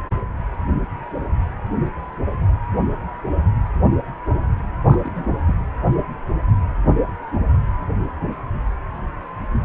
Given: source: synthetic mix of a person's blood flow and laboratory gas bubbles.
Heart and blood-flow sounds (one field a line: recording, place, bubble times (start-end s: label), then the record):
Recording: Doppler ultrasound of blood flow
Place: precordium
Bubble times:
4.86-5.25 s: bubbles
5.45-5.54 s: bubbles
From the record:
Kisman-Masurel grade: 211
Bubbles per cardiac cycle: several, 3 to 8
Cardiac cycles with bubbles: 1 to 10%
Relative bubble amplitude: barely perceptible (0.100 to 0.250)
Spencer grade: 1 (occasional bubble signal discernible with the cardiac motion signal, with majority of cardiac periods free of bubbles)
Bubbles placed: anywhere in the cardiac cycle